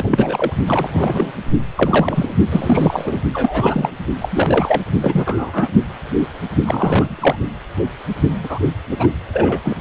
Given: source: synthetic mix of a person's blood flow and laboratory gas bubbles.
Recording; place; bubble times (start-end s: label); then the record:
Doppler ultrasound of blood flow; precordium
0.00-0.53 s: bubbles
0.67-1.32 s: bubbles
1.75-2.33 s: bubbles
2.51-3.20 s: bubbles
3.33-3.90 s: bubbles
4.20-4.82 s: bubbles
5.02-5.69 s: bubbles
6.63-7.36 s: bubbles
8.42-8.58 s: bubbles
8.91-9.08 s: bubbles
9.33-9.61 s: bubbles
9.64-9.75 s: bubbles
From the record:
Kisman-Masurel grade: 333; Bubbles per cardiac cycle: rolling drumbeat, 9 or more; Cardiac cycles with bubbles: 50 to 99%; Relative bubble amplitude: loud (0.450 to 0.775); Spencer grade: 3 (all of the cardiac periods contain showers or single bubble signals, but not dominating or overriding the cardiac motion signals); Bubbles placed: only in the low amplitude regions of the cardiac cycle